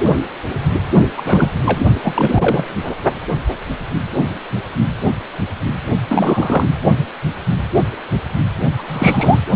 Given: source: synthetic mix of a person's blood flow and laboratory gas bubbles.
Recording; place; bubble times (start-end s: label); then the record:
Doppler ultrasound of blood flow; precordium
1.17-1.47 s: bubbles
1.63-1.78 s: bubbles
2.04-2.88 s: bubbles
6.08-6.70 s: bubbles
8.79-8.83 s: bubbles
8.88-9.39 s: bubbles
From the record:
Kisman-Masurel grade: 332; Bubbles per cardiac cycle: rolling drumbeat, 9 or more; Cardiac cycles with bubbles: 50 to 99%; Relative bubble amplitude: moderate (0.250 to 0.450); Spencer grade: 3 (all of the cardiac periods contain showers or single bubble signals, but not dominating or overriding the cardiac motion signals); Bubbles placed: only in the low amplitude regions of the cardiac cycle